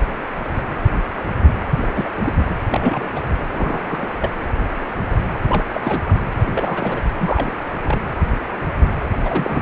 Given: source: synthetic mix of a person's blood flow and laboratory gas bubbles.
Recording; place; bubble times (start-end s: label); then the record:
Doppler ultrasound of blood flow; precordium
1.80-2.09 s: bubbles
2.25-2.33 s: bubbles
2.71-3.06 s: bubbles
3.15-3.21 s: bubbles
3.50-4.08 s: bubbles
4.21-4.30 s: bubbles
5.47-5.63 s: bubbles
5.74-5.80 s: bubbles
5.83-6.00 s: bubbles
6.08-6.14 s: bubbles
6.38-7.04 s: bubbles
7.20-7.55 s: bubbles
7.84-8.00 s: bubbles
9.24-9.62 s: bubbles
From the record:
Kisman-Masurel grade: 222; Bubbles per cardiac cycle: several, 3 to 8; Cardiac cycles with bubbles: 10 to 50%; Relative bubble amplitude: moderate (0.250 to 0.450); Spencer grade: 2 (many but less than half of the cardiac periods contain bubble signals, singularly or in groups); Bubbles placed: anywhere in the cardiac cycle